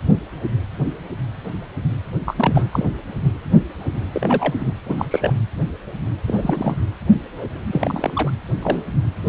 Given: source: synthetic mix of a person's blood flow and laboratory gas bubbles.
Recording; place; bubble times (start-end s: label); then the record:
Doppler ultrasound of blood flow; precordium
2.26-2.64 s: bubbles
2.72-2.85 s: bubbles
4.13-4.54 s: bubbles
4.59-4.73 s: bubbles
4.86-5.06 s: bubbles
5.11-5.33 s: bubbles
6.27-6.77 s: bubbles
7.72-8.11 s: bubbles
8.14-8.30 s: bubbles
8.62-8.84 s: bubbles
From the record:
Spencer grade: 2 (many but less than half of the cardiac periods contain bubble signals, singularly or in groups); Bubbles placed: anywhere in the cardiac cycle